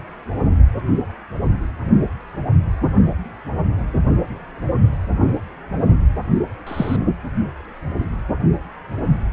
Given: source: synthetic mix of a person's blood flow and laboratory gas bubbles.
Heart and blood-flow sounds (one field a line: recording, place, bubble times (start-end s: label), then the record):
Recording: Doppler ultrasound of blood flow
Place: precordium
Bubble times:
6.67-7.05 s: bubbles
From the record:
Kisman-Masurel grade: 122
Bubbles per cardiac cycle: 1 to 2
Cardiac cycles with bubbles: 10 to 50%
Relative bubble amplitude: moderate (0.250 to 0.450)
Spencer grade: 2 (many but less than half of the cardiac periods contain bubble signals, singularly or in groups)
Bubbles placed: only in the low amplitude regions of the cardiac cycle